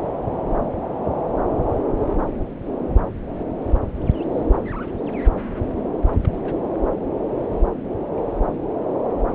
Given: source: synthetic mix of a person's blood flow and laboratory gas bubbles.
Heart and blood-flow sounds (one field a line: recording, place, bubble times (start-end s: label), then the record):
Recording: Doppler ultrasound of blood flow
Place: subclavian vein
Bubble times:
5.97-6.09 s: bubbles
6.23-6.30 s: bubbles
6.43-6.54 s: bubbles
From the record:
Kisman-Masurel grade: 211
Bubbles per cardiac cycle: several, 3 to 8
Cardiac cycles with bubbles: 1 to 10%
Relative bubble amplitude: barely perceptible (0.100 to 0.250)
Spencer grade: 1 (occasional bubble signal discernible with the cardiac motion signal, with majority of cardiac periods free of bubbles)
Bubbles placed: anywhere in the cardiac cycle